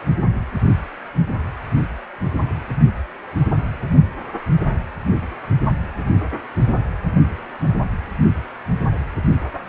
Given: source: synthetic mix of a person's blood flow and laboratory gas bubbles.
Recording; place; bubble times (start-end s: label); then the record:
Doppler ultrasound of blood flow; precordium
4.56-4.64 s: bubbles
From the record:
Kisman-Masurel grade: 121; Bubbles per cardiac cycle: 1 to 2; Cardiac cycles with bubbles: 10 to 50%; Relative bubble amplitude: barely perceptible (0.100 to 0.250); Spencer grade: 2 (many but less than half of the cardiac periods contain bubble signals, singularly or in groups); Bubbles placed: only in the low amplitude regions of the cardiac cycle